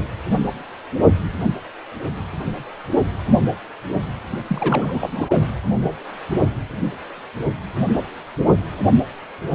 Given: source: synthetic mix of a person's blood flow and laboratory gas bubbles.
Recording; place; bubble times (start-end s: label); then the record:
Doppler ultrasound of blood flow; precordium
4.48-5.09 s: bubbles
5.16-5.47 s: bubbles
From the record:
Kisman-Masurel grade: 212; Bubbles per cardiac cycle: several, 3 to 8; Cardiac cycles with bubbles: 1 to 10%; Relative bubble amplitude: moderate (0.250 to 0.450); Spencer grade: 1 (occasional bubble signal discernible with the cardiac motion signal, with majority of cardiac periods free of bubbles); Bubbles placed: anywhere in the cardiac cycle